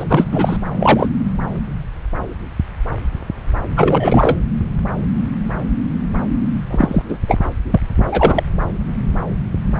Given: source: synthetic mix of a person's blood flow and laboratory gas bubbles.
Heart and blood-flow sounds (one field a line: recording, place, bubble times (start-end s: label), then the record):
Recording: Doppler ultrasound of blood flow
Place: subclavian vein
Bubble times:
0.00-0.04 s: bubbles
0.08-0.24 s: bubbles
0.32-0.57 s: bubbles
0.79-1.08 s: bubbles
3.77-4.37 s: bubbles
6.71-7.04 s: bubbles
7.08-7.19 s: bubbles
7.26-7.38 s: bubbles
7.71-7.79 s: bubbles
8.08-8.43 s: bubbles
From the record:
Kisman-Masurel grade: 223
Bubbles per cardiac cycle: several, 3 to 8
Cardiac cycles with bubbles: 10 to 50%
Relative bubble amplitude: loud (0.450 to 0.775)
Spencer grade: 2 (many but less than half of the cardiac periods contain bubble signals, singularly or in groups)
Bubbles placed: anywhere in the cardiac cycle